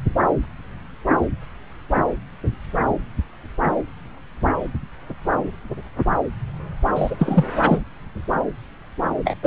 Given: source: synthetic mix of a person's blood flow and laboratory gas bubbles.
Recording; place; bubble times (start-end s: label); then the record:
Doppler ultrasound of blood flow; subclavian vein
6.94-7.16 s: bubbles
7.18-7.50 s: bubbles
7.65-7.82 s: bubbles
9.24-9.37 s: bubbles
9.43-9.47 s: bubbles
From the record:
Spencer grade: 2 (many but less than half of the cardiac periods contain bubble signals, singularly or in groups); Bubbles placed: anywhere in the cardiac cycle